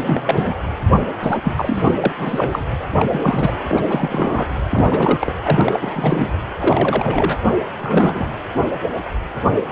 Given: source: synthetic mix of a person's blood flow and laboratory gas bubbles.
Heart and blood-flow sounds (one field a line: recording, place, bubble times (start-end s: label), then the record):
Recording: Doppler ultrasound of blood flow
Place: precordium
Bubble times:
0.02-0.55 s: bubbles
0.90-1.03 s: bubbles
1.22-1.39 s: bubbles
1.44-1.94 s: bubbles
2.04-2.65 s: bubbles
2.77-2.85 s: bubbles
2.98-3.06 s: bubbles
3.12-3.52 s: bubbles
3.67-3.82 s: bubbles
3.89-4.45 s: bubbles
4.70-5.62 s: bubbles
5.64-6.33 s: bubbles
6.59-7.39 s: bubbles
7.76-8.25 s: bubbles
From the record:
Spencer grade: 3 (all of the cardiac periods contain showers or single bubble signals, but not dominating or overriding the cardiac motion signals)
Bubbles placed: anywhere in the cardiac cycle